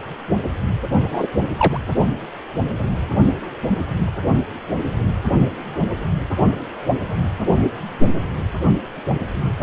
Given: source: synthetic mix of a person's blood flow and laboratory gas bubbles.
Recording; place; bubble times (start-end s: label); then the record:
Doppler ultrasound of blood flow; precordium
1.11-1.27 s: bubbles
1.57-1.80 s: bubbles
From the record:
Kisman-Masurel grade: 113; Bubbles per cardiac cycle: 1 to 2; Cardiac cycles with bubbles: 1 to 10%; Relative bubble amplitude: loud (0.450 to 0.775); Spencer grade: 1 (occasional bubble signal discernible with the cardiac motion signal, with majority of cardiac periods free of bubbles); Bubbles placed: only in the low amplitude regions of the cardiac cycle